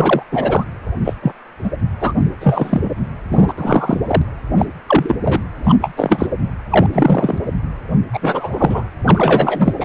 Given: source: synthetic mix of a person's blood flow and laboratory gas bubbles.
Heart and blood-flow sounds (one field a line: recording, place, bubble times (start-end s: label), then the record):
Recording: Doppler ultrasound of blood flow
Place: precordium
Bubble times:
0.00-0.22 s: bubbles
0.32-0.64 s: bubbles
1.04-1.14 s: bubbles
1.22-1.32 s: bubbles
1.64-1.71 s: bubbles
2.00-2.13 s: bubbles
2.40-2.91 s: bubbles
3.31-3.54 s: bubbles
3.57-3.97 s: bubbles
4.07-4.22 s: bubbles
4.58-4.66 s: bubbles
4.87-5.16 s: bubbles
5.24-5.42 s: bubbles
5.63-5.75 s: bubbles
5.81-5.91 s: bubbles
5.96-6.27 s: bubbles
6.70-6.87 s: bubbles
6.92-7.38 s: bubbles
8.13-8.19 s: bubbles
8.21-8.88 s: bubbles
9.04-9.73 s: bubbles
9.80-9.85 s: bubbles
From the record:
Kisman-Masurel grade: 243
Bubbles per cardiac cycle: several, 3 to 8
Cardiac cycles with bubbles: 100%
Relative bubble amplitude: loud (0.450 to 0.775)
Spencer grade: 3 (all of the cardiac periods contain showers or single bubble signals, but not dominating or overriding the cardiac motion signals)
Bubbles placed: anywhere in the cardiac cycle